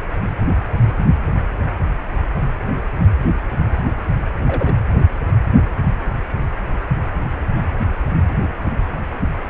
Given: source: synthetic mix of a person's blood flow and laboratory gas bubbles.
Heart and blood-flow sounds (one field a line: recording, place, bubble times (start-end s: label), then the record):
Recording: Doppler ultrasound of blood flow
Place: precordium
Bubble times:
4.48-4.75 s: bubbles
From the record:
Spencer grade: 1 (occasional bubble signal discernible with the cardiac motion signal, with majority of cardiac periods free of bubbles)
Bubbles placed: anywhere in the cardiac cycle